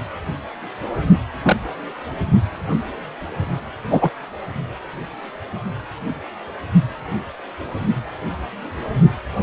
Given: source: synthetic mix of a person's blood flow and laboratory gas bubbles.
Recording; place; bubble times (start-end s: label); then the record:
Doppler ultrasound of blood flow; precordium
1.43-1.57 s: bubbles
3.90-4.10 s: bubbles
From the record:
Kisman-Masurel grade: 123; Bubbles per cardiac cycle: 1 to 2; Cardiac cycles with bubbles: 10 to 50%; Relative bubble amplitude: loud (0.450 to 0.775); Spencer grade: 2 (many but less than half of the cardiac periods contain bubble signals, singularly or in groups); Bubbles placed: only in the low amplitude regions of the cardiac cycle